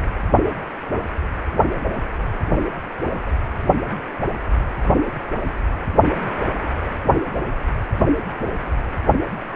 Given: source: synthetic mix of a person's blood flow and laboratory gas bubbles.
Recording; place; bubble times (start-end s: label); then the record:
Doppler ultrasound of blood flow; precordium
no bubbles
From the record:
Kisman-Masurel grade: 000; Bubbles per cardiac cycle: 0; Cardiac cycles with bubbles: 0%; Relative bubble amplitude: no bubbles discernible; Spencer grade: 0 (complete lack of bubble signals)